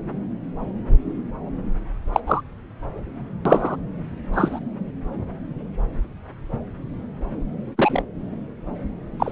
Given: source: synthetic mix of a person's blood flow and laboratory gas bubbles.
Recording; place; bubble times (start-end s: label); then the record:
Doppler ultrasound of blood flow; subclavian vein
2.12-2.20 s: bubbles
2.26-2.42 s: bubbles
3.45-3.76 s: bubbles
4.33-4.59 s: bubbles
7.78-8.02 s: bubbles
9.20-9.31 s: bubbles
From the record:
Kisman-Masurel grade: 123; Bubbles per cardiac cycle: 1 to 2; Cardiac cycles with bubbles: 10 to 50%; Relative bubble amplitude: loud (0.450 to 0.775); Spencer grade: 2 (many but less than half of the cardiac periods contain bubble signals, singularly or in groups); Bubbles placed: anywhere in the cardiac cycle